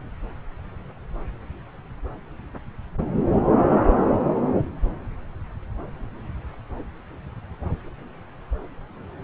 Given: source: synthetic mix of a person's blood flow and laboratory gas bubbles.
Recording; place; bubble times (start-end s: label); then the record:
Doppler ultrasound of blood flow; subclavian vein
no bubbles
From the record:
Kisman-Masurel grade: 000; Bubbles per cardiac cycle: 0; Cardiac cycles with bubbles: 0%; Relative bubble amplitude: no bubbles discernible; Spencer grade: 0 (complete lack of bubble signals)